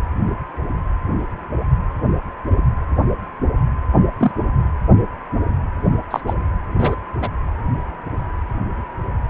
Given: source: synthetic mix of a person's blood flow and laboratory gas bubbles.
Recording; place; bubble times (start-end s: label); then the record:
Doppler ultrasound of blood flow; precordium
4.19-4.32 s: bubbles
6.11-6.21 s: bubbles
6.27-6.33 s: bubbles
6.78-6.96 s: bubbles
7.22-7.28 s: bubbles
From the record:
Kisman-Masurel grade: 123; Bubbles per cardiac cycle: 1 to 2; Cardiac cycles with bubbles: 10 to 50%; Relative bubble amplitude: loud (0.450 to 0.775); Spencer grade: 2 (many but less than half of the cardiac periods contain bubble signals, singularly or in groups); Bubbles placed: anywhere in the cardiac cycle